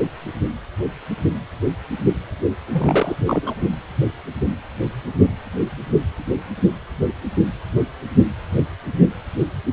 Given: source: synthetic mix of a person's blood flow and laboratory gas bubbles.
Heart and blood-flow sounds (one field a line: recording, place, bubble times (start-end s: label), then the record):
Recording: Doppler ultrasound of blood flow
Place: precordium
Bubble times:
2.71-3.16 s: bubbles
3.26-3.56 s: bubbles
From the record:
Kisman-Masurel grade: 212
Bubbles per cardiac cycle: several, 3 to 8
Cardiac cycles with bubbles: 1 to 10%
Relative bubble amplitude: moderate (0.250 to 0.450)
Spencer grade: 1 (occasional bubble signal discernible with the cardiac motion signal, with majority of cardiac periods free of bubbles)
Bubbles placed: anywhere in the cardiac cycle